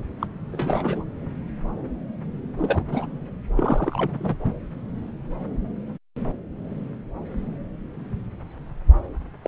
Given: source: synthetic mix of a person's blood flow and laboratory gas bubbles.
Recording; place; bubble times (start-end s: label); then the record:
Doppler ultrasound of blood flow; subclavian vein
0.19-0.27 s: bubbles
0.52-1.04 s: bubbles
2.58-2.84 s: bubbles
2.88-3.06 s: bubbles
3.56-4.37 s: bubbles
4.45-4.53 s: bubbles
9.44-9.48 s: bubbles
From the record:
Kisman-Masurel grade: 221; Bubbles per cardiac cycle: several, 3 to 8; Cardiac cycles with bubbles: 10 to 50%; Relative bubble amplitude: barely perceptible (0.100 to 0.250); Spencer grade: 2 (many but less than half of the cardiac periods contain bubble signals, singularly or in groups); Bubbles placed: anywhere in the cardiac cycle